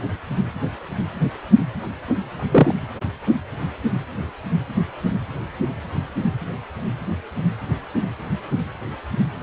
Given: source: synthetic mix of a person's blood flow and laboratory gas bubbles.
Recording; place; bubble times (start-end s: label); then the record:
Doppler ultrasound of blood flow; precordium
2.36-2.75 s: bubbles
From the record:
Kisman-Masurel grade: 113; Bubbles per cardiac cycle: 1 to 2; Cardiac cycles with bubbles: 1 to 10%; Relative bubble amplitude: loud (0.450 to 0.775); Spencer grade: 1 (occasional bubble signal discernible with the cardiac motion signal, with majority of cardiac periods free of bubbles); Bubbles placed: anywhere in the cardiac cycle